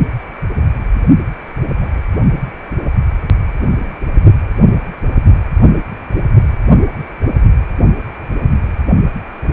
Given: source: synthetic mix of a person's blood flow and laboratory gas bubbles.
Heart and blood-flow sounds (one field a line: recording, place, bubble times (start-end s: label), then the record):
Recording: Doppler ultrasound of blood flow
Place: precordium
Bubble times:
1.80-2.02 s: bubbles
From the record:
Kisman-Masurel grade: 111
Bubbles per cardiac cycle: 1 to 2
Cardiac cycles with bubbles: 1 to 10%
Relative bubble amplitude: barely perceptible (0.100 to 0.250)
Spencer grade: 1 (occasional bubble signal discernible with the cardiac motion signal, with majority of cardiac periods free of bubbles)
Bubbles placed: only in the low amplitude regions of the cardiac cycle